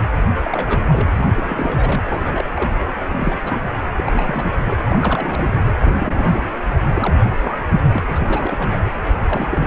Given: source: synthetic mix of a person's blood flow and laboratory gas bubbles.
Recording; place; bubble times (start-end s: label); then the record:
Doppler ultrasound of blood flow; precordium
0.44-1.07 s: bubbles
1.16-1.26 s: bubbles
1.34-2.03 s: bubbles
2.10-2.44 s: bubbles
2.54-2.71 s: bubbles
3.09-3.38 s: bubbles
3.45-3.63 s: bubbles
3.97-4.54 s: bubbles
4.62-4.84 s: bubbles
4.88-5.62 s: bubbles
5.79-5.97 s: bubbles
6.00-6.50 s: bubbles
6.88-7.14 s: bubbles
7.39-7.57 s: bubbles
7.93-8.01 s: bubbles
8.07-8.68 s: bubbles
9.18-9.67 s: bubbles
From the record:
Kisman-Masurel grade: 342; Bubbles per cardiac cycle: rolling drumbeat, 9 or more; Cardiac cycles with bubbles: 100%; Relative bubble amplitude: moderate (0.250 to 0.450); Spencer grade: 3 (all of the cardiac periods contain showers or single bubble signals, but not dominating or overriding the cardiac motion signals); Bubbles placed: anywhere in the cardiac cycle